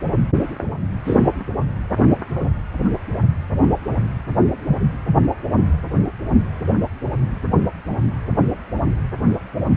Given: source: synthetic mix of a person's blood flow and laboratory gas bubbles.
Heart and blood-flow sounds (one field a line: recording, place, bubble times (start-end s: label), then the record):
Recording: Doppler ultrasound of blood flow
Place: precordium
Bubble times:
1.04-1.20 s: bubbles
1.39-1.44 s: bubbles
From the record:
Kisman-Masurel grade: 122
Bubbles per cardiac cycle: 1 to 2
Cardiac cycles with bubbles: 10 to 50%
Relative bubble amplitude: moderate (0.250 to 0.450)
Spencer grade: 2 (many but less than half of the cardiac periods contain bubble signals, singularly or in groups)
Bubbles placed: anywhere in the cardiac cycle